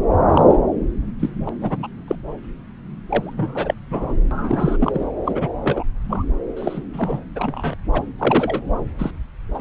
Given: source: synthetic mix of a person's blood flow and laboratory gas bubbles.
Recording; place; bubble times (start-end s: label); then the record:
Doppler ultrasound of blood flow; subclavian vein
0.29-0.55 s: bubbles
1.19-1.30 s: bubbles
1.45-1.49 s: bubbles
1.61-1.88 s: bubbles
2.07-2.15 s: bubbles
3.07-3.75 s: bubbles
3.90-4.14 s: bubbles
4.31-4.77 s: bubbles
4.80-5.05 s: bubbles
5.24-5.48 s: bubbles
5.63-5.83 s: bubbles
6.09-6.25 s: bubbles
6.56-6.82 s: bubbles
6.93-7.20 s: bubbles
7.35-7.75 s: bubbles
7.93-8.06 s: bubbles
8.18-8.62 s: bubbles
8.98-9.11 s: bubbles
9.54-9.61 s: bubbles
From the record:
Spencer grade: 3 (all of the cardiac periods contain showers or single bubble signals, but not dominating or overriding the cardiac motion signals); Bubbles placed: anywhere in the cardiac cycle